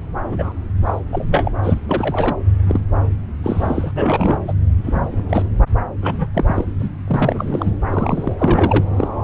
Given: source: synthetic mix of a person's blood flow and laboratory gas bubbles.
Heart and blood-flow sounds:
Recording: Doppler ultrasound of blood flow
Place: subclavian vein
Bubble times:
0.32-0.52 s: bubbles
0.86-0.99 s: bubbles
1.10-1.50 s: bubbles
1.62-1.79 s: bubbles
1.88-2.35 s: bubbles
2.67-2.81 s: bubbles
3.44-3.92 s: bubbles
3.96-4.38 s: bubbles
4.47-4.54 s: bubbles
4.83-5.25 s: bubbles
5.29-5.49 s: bubbles
6.01-6.29 s: bubbles
6.34-6.65 s: bubbles
6.79-6.88 s: bubbles
7.07-7.71 s: bubbles
7.90-8.36 s: bubbles
8.38-8.85 s: bubbles
8.96-9.08 s: bubbles
From the record:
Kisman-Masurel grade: 242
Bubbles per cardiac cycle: several, 3 to 8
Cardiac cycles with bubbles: 100%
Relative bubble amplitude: moderate (0.250 to 0.450)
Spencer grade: 3 (all of the cardiac periods contain showers or single bubble signals, but not dominating or overriding the cardiac motion signals)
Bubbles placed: anywhere in the cardiac cycle

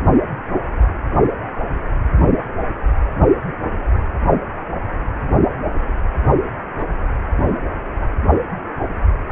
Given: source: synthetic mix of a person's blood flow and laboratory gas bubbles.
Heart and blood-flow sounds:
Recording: Doppler ultrasound of blood flow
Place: precordium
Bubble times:
6.78-6.83 s: bubbles
From the record:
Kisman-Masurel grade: 111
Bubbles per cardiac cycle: 1 to 2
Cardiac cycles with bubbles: 1 to 10%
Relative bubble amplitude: barely perceptible (0.100 to 0.250)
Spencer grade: 1 (occasional bubble signal discernible with the cardiac motion signal, with majority of cardiac periods free of bubbles)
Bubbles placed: anywhere in the cardiac cycle

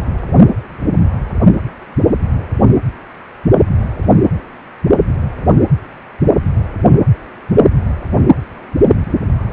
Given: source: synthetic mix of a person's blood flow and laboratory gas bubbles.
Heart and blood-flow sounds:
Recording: Doppler ultrasound of blood flow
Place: precordium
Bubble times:
no bubbles
From the record:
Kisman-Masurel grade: 000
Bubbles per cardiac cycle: 0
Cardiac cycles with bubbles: 0%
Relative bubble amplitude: no bubbles discernible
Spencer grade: 0 (complete lack of bubble signals)

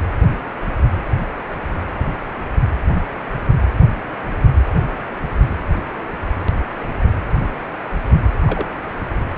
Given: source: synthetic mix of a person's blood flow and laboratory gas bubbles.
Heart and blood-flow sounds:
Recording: Doppler ultrasound of blood flow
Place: precordium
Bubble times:
8.46-8.66 s: bubbles
From the record:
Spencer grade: 1 (occasional bubble signal discernible with the cardiac motion signal, with majority of cardiac periods free of bubbles)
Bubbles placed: anywhere in the cardiac cycle

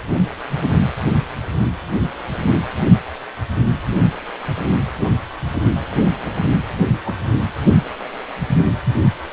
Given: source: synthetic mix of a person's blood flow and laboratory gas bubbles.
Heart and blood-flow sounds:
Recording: Doppler ultrasound of blood flow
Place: precordium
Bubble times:
7.05-7.15 s: bubbles
7.62-7.76 s: bubbles
From the record:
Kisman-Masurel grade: 111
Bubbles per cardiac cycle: 1 to 2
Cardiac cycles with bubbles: 1 to 10%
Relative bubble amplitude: barely perceptible (0.100 to 0.250)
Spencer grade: 1 (occasional bubble signal discernible with the cardiac motion signal, with majority of cardiac periods free of bubbles)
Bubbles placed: anywhere in the cardiac cycle

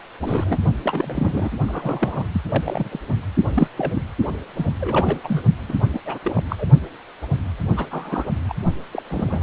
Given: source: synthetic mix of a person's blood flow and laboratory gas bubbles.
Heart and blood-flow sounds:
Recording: Doppler ultrasound of blood flow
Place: precordium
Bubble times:
0.20-0.58 s: bubbles
0.83-1.51 s: bubbles
1.68-2.25 s: bubbles
2.33-2.41 s: bubbles
2.45-2.99 s: bubbles
3.54-3.68 s: bubbles
3.77-4.01 s: bubbles
4.55-4.66 s: bubbles
4.80-5.19 s: bubbles
5.23-5.42 s: bubbles
5.68-5.74 s: bubbles
5.93-5.99 s: bubbles
6.05-6.18 s: bubbles
6.22-6.43 s: bubbles
6.49-6.65 s: bubbles
7.76-7.87 s: bubbles
7.90-8.24 s: bubbles
8.48-8.54 s: bubbles
8.91-9.03 s: bubbles
9.09-9.43 s: bubbles
From the record:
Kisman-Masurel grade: 232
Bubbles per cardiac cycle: several, 3 to 8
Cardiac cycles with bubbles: 50 to 99%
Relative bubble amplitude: moderate (0.250 to 0.450)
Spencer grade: 3 (all of the cardiac periods contain showers or single bubble signals, but not dominating or overriding the cardiac motion signals)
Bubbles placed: only in the low amplitude regions of the cardiac cycle

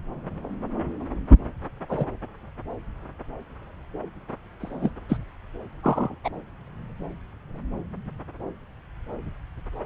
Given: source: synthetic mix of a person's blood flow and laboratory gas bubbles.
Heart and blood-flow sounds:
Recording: Doppler ultrasound of blood flow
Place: subclavian vein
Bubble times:
1.89-2.06 s: bubbles
4.60-4.91 s: bubbles
5.09-5.17 s: bubbles
5.83-6.15 s: bubbles
6.24-6.30 s: bubbles
From the record:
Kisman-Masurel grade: 122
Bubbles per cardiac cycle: 1 to 2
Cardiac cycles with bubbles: 10 to 50%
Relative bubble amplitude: moderate (0.250 to 0.450)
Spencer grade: 2 (many but less than half of the cardiac periods contain bubble signals, singularly or in groups)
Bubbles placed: anywhere in the cardiac cycle

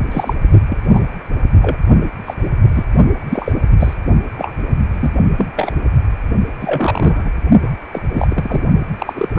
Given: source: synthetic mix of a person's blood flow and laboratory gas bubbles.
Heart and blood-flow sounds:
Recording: Doppler ultrasound of blood flow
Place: precordium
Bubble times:
0.11-0.33 s: bubbles
0.68-0.77 s: bubbles
0.92-1.01 s: bubbles
1.62-1.77 s: bubbles
2.25-2.34 s: bubbles
2.75-2.84 s: bubbles
3.29-3.52 s: bubbles
3.79-3.96 s: bubbles
4.37-4.54 s: bubbles
4.94-5.12 s: bubbles
5.38-5.51 s: bubbles
5.55-5.72 s: bubbles
6.61-7.29 s: bubbles
7.62-7.70 s: bubbles
7.92-8.01 s: bubbles
8.13-8.61 s: bubbles
8.99-9.29 s: bubbles
9.34-9.39 s: bubbles
From the record:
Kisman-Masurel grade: 243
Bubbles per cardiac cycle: several, 3 to 8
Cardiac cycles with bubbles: 100%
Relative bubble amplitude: loud (0.450 to 0.775)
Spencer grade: 3 (all of the cardiac periods contain showers or single bubble signals, but not dominating or overriding the cardiac motion signals)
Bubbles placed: only in the low amplitude regions of the cardiac cycle

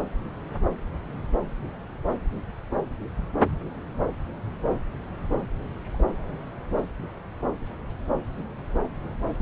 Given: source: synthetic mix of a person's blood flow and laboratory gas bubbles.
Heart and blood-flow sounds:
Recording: Doppler ultrasound of blood flow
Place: subclavian vein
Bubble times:
5.92-6.04 s: bubbles
From the record:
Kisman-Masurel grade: 111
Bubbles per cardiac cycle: 1 to 2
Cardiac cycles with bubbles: 1 to 10%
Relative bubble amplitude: barely perceptible (0.100 to 0.250)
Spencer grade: 1 (occasional bubble signal discernible with the cardiac motion signal, with majority of cardiac periods free of bubbles)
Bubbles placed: anywhere in the cardiac cycle

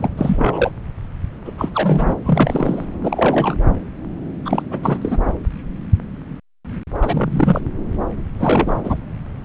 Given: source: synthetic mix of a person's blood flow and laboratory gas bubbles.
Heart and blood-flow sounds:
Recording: Doppler ultrasound of blood flow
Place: subclavian vein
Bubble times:
0.00-0.09 s: bubbles
0.17-0.71 s: bubbles
1.45-1.52 s: bubbles
1.57-1.69 s: bubbles
1.74-2.15 s: bubbles
2.25-2.85 s: bubbles
3.03-3.55 s: bubbles
4.45-4.62 s: bubbles
4.70-4.98 s: bubbles
5.01-5.18 s: bubbles
7.01-7.61 s: bubbles
8.39-8.98 s: bubbles
From the record:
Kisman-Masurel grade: 332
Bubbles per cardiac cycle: rolling drumbeat, 9 or more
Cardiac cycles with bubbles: 50 to 99%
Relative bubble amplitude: moderate (0.250 to 0.450)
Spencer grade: 3 (all of the cardiac periods contain showers or single bubble signals, but not dominating or overriding the cardiac motion signals)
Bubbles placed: anywhere in the cardiac cycle

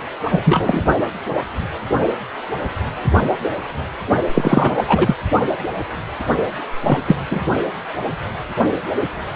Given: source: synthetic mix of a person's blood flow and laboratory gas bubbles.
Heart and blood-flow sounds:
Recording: Doppler ultrasound of blood flow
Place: precordium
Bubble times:
0.32-0.40 s: bubbles
0.44-0.83 s: bubbles
4.33-4.83 s: bubbles
4.88-5.15 s: bubbles
6.80-6.98 s: bubbles
7.06-7.17 s: bubbles
7.31-7.42 s: bubbles
From the record:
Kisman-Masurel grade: 223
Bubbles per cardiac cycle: several, 3 to 8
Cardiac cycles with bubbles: 10 to 50%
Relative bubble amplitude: loud (0.450 to 0.775)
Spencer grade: 2 (many but less than half of the cardiac periods contain bubble signals, singularly or in groups)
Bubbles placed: only in the low amplitude regions of the cardiac cycle

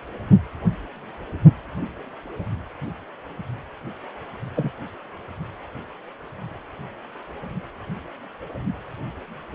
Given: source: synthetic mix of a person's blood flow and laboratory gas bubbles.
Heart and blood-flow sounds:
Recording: Doppler ultrasound of blood flow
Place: precordium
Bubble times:
4.55-4.71 s: bubbles
From the record:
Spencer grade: 1 (occasional bubble signal discernible with the cardiac motion signal, with majority of cardiac periods free of bubbles)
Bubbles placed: anywhere in the cardiac cycle

